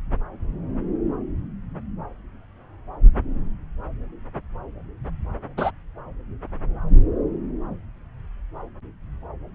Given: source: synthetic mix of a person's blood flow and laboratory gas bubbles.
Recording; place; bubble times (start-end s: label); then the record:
Doppler ultrasound of blood flow; subclavian vein
5.57-5.71 s: bubbles
From the record:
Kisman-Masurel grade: 113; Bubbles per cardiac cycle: 1 to 2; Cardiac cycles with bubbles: 1 to 10%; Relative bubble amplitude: loud (0.450 to 0.775); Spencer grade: 1 (occasional bubble signal discernible with the cardiac motion signal, with majority of cardiac periods free of bubbles); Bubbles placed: anywhere in the cardiac cycle